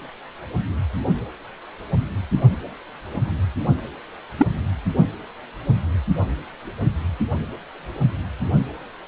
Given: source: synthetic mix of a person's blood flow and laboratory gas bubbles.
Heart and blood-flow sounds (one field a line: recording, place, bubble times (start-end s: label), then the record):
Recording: Doppler ultrasound of blood flow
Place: precordium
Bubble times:
4.38-4.47 s: bubbles
From the record:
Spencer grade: 1 (occasional bubble signal discernible with the cardiac motion signal, with majority of cardiac periods free of bubbles)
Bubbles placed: only in the low amplitude regions of the cardiac cycle